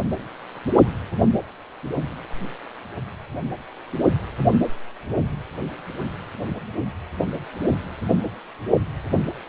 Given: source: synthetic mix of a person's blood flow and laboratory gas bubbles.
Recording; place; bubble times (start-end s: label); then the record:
Doppler ultrasound of blood flow; precordium
no bubbles
From the record:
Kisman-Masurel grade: 000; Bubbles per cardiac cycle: 0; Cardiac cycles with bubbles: 0%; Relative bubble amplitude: no bubbles discernible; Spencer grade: 0 (complete lack of bubble signals)